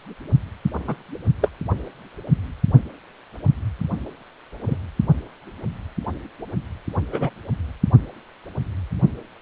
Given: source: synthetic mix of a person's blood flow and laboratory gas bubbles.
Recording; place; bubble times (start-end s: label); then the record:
Doppler ultrasound of blood flow; precordium
0.86-0.96 s: bubbles
1.41-1.49 s: bubbles
4.66-4.78 s: bubbles
7.12-7.30 s: bubbles
From the record:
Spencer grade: 2 (many but less than half of the cardiac periods contain bubble signals, singularly or in groups); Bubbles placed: only in the low amplitude regions of the cardiac cycle